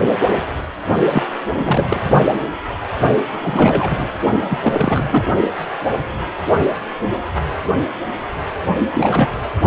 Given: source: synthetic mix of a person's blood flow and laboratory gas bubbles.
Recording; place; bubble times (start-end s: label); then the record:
Doppler ultrasound of blood flow; precordium
1.09-1.23 s: bubbles
1.56-1.84 s: bubbles
1.89-2.00 s: bubbles
3.43-4.08 s: bubbles
4.48-4.58 s: bubbles
4.61-5.25 s: bubbles
8.91-9.41 s: bubbles
From the record:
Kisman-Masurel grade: 332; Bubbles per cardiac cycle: rolling drumbeat, 9 or more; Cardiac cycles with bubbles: 50 to 99%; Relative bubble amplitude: moderate (0.250 to 0.450); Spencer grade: 3 (all of the cardiac periods contain showers or single bubble signals, but not dominating or overriding the cardiac motion signals); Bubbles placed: only in the low amplitude regions of the cardiac cycle